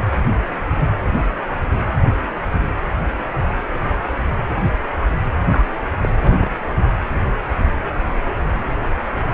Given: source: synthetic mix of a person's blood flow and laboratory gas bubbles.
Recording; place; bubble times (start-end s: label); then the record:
Doppler ultrasound of blood flow; precordium
5.51-5.66 s: bubbles
6.02-6.09 s: bubbles
6.24-6.56 s: bubbles
From the record:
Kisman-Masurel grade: 122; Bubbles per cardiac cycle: 1 to 2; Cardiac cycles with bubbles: 10 to 50%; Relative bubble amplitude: moderate (0.250 to 0.450); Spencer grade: 2 (many but less than half of the cardiac periods contain bubble signals, singularly or in groups); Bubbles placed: anywhere in the cardiac cycle